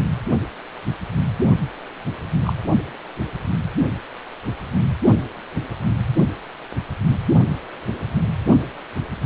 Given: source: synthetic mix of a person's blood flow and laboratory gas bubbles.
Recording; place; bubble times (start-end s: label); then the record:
Doppler ultrasound of blood flow; precordium
2.43-2.53 s: bubbles
From the record:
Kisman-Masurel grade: 112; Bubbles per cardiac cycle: 1 to 2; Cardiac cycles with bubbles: 1 to 10%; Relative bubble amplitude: moderate (0.250 to 0.450); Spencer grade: 1 (occasional bubble signal discernible with the cardiac motion signal, with majority of cardiac periods free of bubbles); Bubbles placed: only in the low amplitude regions of the cardiac cycle